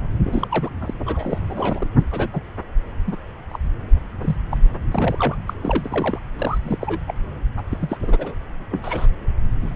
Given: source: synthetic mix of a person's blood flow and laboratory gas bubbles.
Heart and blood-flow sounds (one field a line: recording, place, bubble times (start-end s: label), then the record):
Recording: Doppler ultrasound of blood flow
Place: subclavian vein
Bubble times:
0.24-0.69 s: bubbles
0.80-0.94 s: bubbles
1.06-1.39 s: bubbles
1.49-1.87 s: bubbles
1.99-2.04 s: bubbles
2.11-2.28 s: bubbles
2.32-2.41 s: bubbles
3.06-3.17 s: bubbles
3.49-3.58 s: bubbles
4.21-4.37 s: bubbles
4.50-4.57 s: bubbles
4.91-5.35 s: bubbles
5.47-5.54 s: bubbles
5.60-6.19 s: bubbles
6.37-6.58 s: bubbles
6.63-6.98 s: bubbles
7.08-7.14 s: bubbles
7.57-7.62 s: bubbles
7.71-7.77 s: bubbles
7.81-7.98 s: bubbles
8.03-8.33 s: bubbles
8.71-8.80 s: bubbles
8.83-9.06 s: bubbles
9.61-9.76 s: bubbles
From the record:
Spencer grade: 3 (all of the cardiac periods contain showers or single bubble signals, but not dominating or overriding the cardiac motion signals)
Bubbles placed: anywhere in the cardiac cycle